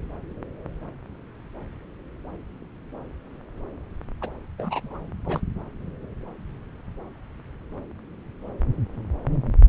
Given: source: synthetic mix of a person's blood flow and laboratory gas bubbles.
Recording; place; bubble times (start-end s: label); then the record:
Doppler ultrasound of blood flow; subclavian vein
4.21-4.29 s: bubbles
4.58-5.00 s: bubbles
5.25-5.40 s: bubbles
From the record:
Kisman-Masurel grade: 221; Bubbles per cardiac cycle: several, 3 to 8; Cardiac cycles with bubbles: 10 to 50%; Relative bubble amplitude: barely perceptible (0.100 to 0.250); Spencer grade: 2 (many but less than half of the cardiac periods contain bubble signals, singularly or in groups); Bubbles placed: anywhere in the cardiac cycle